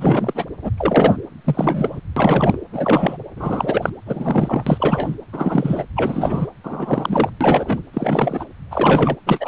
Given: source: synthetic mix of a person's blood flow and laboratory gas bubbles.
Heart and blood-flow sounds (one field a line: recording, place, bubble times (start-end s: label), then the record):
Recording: Doppler ultrasound of blood flow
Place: precordium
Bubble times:
0.00-0.45 s: bubbles
0.62-0.71 s: bubbles
0.77-1.17 s: bubbles
1.44-2.00 s: bubbles
2.16-2.58 s: bubbles
2.71-3.17 s: bubbles
3.36-3.89 s: bubbles
4.05-5.15 s: bubbles
5.33-5.85 s: bubbles
5.96-6.51 s: bubbles
6.63-7.30 s: bubbles
7.41-7.82 s: bubbles
7.93-8.45 s: bubbles
8.71-9.16 s: bubbles
9.26-9.48 s: bubbles
From the record:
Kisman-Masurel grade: 333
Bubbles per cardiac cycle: rolling drumbeat, 9 or more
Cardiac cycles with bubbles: 50 to 99%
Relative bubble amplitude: loud (0.450 to 0.775)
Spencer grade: 3 (all of the cardiac periods contain showers or single bubble signals, but not dominating or overriding the cardiac motion signals)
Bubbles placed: anywhere in the cardiac cycle